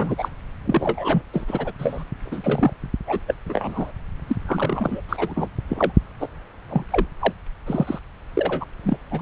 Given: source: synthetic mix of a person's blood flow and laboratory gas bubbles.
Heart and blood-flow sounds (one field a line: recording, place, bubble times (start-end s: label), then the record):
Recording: Doppler ultrasound of blood flow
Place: subclavian vein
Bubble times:
0.00-0.29 s: bubbles
0.65-1.22 s: bubbles
1.33-1.72 s: bubbles
1.78-2.05 s: bubbles
2.23-2.74 s: bubbles
3.07-3.21 s: bubbles
3.28-3.35 s: bubbles
3.46-3.92 s: bubbles
4.27-4.36 s: bubbles
4.46-5.01 s: bubbles
5.09-5.48 s: bubbles
5.70-5.92 s: bubbles
6.20-6.29 s: bubbles
6.69-6.84 s: bubbles
6.90-7.06 s: bubbles
7.20-7.33 s: bubbles
7.66-7.99 s: bubbles
8.34-8.65 s: bubbles
8.83-8.97 s: bubbles
9.10-9.22 s: bubbles
From the record:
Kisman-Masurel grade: 243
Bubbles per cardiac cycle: several, 3 to 8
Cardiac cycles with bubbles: 100%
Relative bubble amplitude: loud (0.450 to 0.775)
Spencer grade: 3 (all of the cardiac periods contain showers or single bubble signals, but not dominating or overriding the cardiac motion signals)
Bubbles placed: anywhere in the cardiac cycle